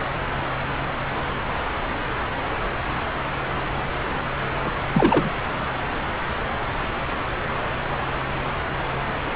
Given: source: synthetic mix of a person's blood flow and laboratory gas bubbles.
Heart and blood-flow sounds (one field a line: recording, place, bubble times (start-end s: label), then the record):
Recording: Doppler ultrasound of blood flow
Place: subclavian vein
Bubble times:
4.62-4.72 s: bubbles
4.94-5.30 s: bubbles
From the record:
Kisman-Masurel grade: 213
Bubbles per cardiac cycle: several, 3 to 8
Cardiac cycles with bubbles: 1 to 10%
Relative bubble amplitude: loud (0.450 to 0.775)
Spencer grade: 1 (occasional bubble signal discernible with the cardiac motion signal, with majority of cardiac periods free of bubbles)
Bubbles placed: anywhere in the cardiac cycle